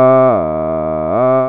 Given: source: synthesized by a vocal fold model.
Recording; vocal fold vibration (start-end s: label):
sustained vowel that changes in the middle
0.00-0.25 s: 129.8 Hz, open quotient 0.35
0.45-1.05 s: 78.5 Hz, open quotient 0.23
1.25-1.49 s: 129.8 Hz, open quotient 0.35